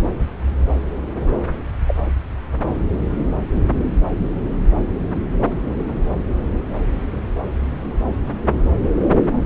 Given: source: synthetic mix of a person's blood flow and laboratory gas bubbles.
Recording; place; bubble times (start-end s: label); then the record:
Doppler ultrasound of blood flow; subclavian vein
1.86-1.95 s: bubbles
From the record:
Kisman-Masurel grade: 112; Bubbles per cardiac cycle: 1 to 2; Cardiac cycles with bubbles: 1 to 10%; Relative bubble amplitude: moderate (0.250 to 0.450); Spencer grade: 1 (occasional bubble signal discernible with the cardiac motion signal, with majority of cardiac periods free of bubbles); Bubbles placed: anywhere in the cardiac cycle